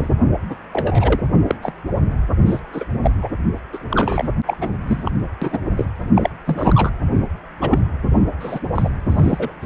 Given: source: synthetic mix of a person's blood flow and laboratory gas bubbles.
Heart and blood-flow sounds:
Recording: Doppler ultrasound of blood flow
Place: precordium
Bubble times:
0.00-0.08 s: bubbles
0.49-0.55 s: bubbles
0.72-1.22 s: bubbles
1.47-1.55 s: bubbles
1.62-1.72 s: bubbles
2.46-2.60 s: bubbles
2.73-2.85 s: bubbles
3.03-3.11 s: bubbles
3.22-3.29 s: bubbles
3.73-3.78 s: bubbles
3.90-4.30 s: bubbles
4.47-4.57 s: bubbles
4.60-4.69 s: bubbles
4.86-5.11 s: bubbles
5.42-5.58 s: bubbles
5.76-5.84 s: bubbles
6.15-6.29 s: bubbles
6.46-6.90 s: bubbles
7.61-7.79 s: bubbles
8.40-8.59 s: bubbles
8.74-8.90 s: bubbles
9.08-9.53 s: bubbles
9.62-9.66 s: bubbles
From the record:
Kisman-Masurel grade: 242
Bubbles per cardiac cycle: several, 3 to 8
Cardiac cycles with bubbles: 100%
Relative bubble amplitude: moderate (0.250 to 0.450)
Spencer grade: 3 (all of the cardiac periods contain showers or single bubble signals, but not dominating or overriding the cardiac motion signals)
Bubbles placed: anywhere in the cardiac cycle

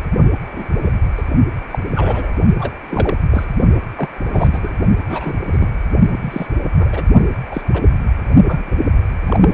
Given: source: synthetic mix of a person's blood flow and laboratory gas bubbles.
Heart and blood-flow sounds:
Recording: Doppler ultrasound of blood flow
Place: precordium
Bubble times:
0.52-0.67 s: bubbles
0.85-0.91 s: bubbles
1.17-1.23 s: bubbles
1.71-1.78 s: bubbles
1.95-2.33 s: bubbles
2.58-2.72 s: bubbles
2.89-3.15 s: bubbles
3.31-3.45 s: bubbles
3.96-4.09 s: bubbles
4.31-4.73 s: bubbles
5.08-5.34 s: bubbles
5.52-5.70 s: bubbles
6.12-6.47 s: bubbles
6.77-6.88 s: bubbles
6.92-7.04 s: bubbles
7.51-7.61 s: bubbles
7.73-7.81 s: bubbles
8.47-8.77 s: bubbles
9.26-9.54 s: bubbles
From the record:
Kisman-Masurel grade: 242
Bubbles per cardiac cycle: several, 3 to 8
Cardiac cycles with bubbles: 100%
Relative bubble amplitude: moderate (0.250 to 0.450)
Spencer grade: 3 (all of the cardiac periods contain showers or single bubble signals, but not dominating or overriding the cardiac motion signals)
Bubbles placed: only in the low amplitude regions of the cardiac cycle

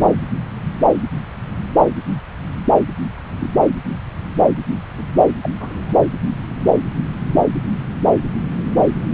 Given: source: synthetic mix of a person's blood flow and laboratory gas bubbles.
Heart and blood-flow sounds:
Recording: Doppler ultrasound of blood flow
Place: subclavian vein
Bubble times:
0.01-0.05 s: bubbles
0.44-0.71 s: bubbles
3.40-3.50 s: bubbles
4.97-5.04 s: bubbles
5.42-5.50 s: bubbles
5.58-5.95 s: bubbles
From the record:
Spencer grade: 2 (many but less than half of the cardiac periods contain bubble signals, singularly or in groups)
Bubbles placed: anywhere in the cardiac cycle

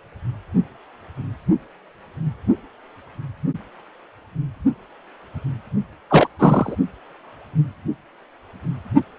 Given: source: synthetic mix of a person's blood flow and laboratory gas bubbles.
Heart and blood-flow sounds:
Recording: Doppler ultrasound of blood flow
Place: precordium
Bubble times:
6.09-6.28 s: bubbles
6.38-6.76 s: bubbles
From the record:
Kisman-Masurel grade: 213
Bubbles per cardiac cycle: several, 3 to 8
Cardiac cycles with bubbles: 1 to 10%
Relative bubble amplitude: loud (0.450 to 0.775)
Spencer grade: 1 (occasional bubble signal discernible with the cardiac motion signal, with majority of cardiac periods free of bubbles)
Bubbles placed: only in the low amplitude regions of the cardiac cycle

